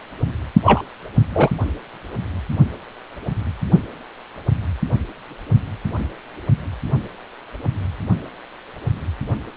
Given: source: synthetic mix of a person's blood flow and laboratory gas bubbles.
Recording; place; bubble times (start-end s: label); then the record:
Doppler ultrasound of blood flow; precordium
0.64-0.81 s: bubbles
1.34-1.50 s: bubbles
From the record:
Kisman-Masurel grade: 213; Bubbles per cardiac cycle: several, 3 to 8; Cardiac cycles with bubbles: 1 to 10%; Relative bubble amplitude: loud (0.450 to 0.775); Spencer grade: 1 (occasional bubble signal discernible with the cardiac motion signal, with majority of cardiac periods free of bubbles); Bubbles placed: anywhere in the cardiac cycle